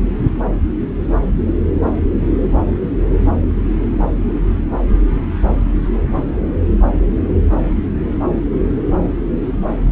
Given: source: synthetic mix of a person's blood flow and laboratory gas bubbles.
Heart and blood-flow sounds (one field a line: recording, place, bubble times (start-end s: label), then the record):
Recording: Doppler ultrasound of blood flow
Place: subclavian vein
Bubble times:
no bubbles
From the record:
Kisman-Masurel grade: 000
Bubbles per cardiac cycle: 0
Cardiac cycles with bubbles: 0%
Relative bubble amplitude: no bubbles discernible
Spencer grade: 0 (complete lack of bubble signals)